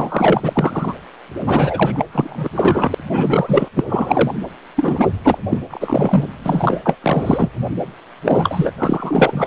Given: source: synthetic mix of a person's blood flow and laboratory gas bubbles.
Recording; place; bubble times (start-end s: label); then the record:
Doppler ultrasound of blood flow; precordium
0.00-0.95 s: bubbles
1.44-2.04 s: bubbles
2.12-2.50 s: bubbles
2.55-2.94 s: bubbles
3.09-3.69 s: bubbles
3.76-3.84 s: bubbles
3.88-4.35 s: bubbles
4.76-5.10 s: bubbles
5.24-5.38 s: bubbles
5.49-5.61 s: bubbles
5.69-6.25 s: bubbles
6.44-6.80 s: bubbles
6.86-6.97 s: bubbles
7.02-7.51 s: bubbles
8.25-8.72 s: bubbles
8.78-9.47 s: bubbles
From the record:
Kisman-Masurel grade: 444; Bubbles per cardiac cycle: continuous sound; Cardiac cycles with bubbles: 100%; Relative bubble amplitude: maximal (0.775 to 0.999); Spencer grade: 4 (maximum detectable bubble signal sounding continuously throughout systole and diastole of every cardiac period, and overriding the amplitude of the normal cardiac signals); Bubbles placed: anywhere in the cardiac cycle